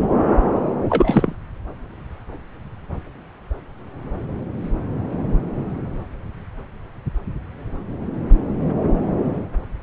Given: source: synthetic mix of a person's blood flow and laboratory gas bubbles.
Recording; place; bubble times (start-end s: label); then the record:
Doppler ultrasound of blood flow; subclavian vein
0.89-1.35 s: bubbles
From the record:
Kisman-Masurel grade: 213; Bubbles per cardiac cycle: several, 3 to 8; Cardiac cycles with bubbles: 1 to 10%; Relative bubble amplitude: loud (0.450 to 0.775); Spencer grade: 1 (occasional bubble signal discernible with the cardiac motion signal, with majority of cardiac periods free of bubbles); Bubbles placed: anywhere in the cardiac cycle